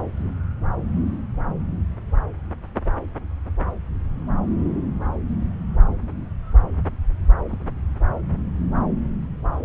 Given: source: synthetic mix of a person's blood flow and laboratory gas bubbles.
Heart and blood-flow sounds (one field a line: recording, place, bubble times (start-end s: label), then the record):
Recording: Doppler ultrasound of blood flow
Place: subclavian vein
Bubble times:
7.48-7.59 s: bubbles
From the record:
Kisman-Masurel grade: 111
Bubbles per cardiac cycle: 1 to 2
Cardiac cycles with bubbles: 1 to 10%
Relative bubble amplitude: barely perceptible (0.100 to 0.250)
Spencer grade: 1 (occasional bubble signal discernible with the cardiac motion signal, with majority of cardiac periods free of bubbles)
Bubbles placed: anywhere in the cardiac cycle